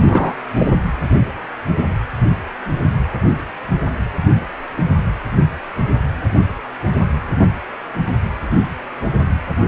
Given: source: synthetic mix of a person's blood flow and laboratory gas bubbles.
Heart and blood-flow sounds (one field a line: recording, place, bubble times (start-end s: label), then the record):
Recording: Doppler ultrasound of blood flow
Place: precordium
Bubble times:
0.00-0.34 s: bubbles
0.57-0.70 s: bubbles
From the record:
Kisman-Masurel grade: 213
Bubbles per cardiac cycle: several, 3 to 8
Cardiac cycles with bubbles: 1 to 10%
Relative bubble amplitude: loud (0.450 to 0.775)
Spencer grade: 1 (occasional bubble signal discernible with the cardiac motion signal, with majority of cardiac periods free of bubbles)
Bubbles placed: anywhere in the cardiac cycle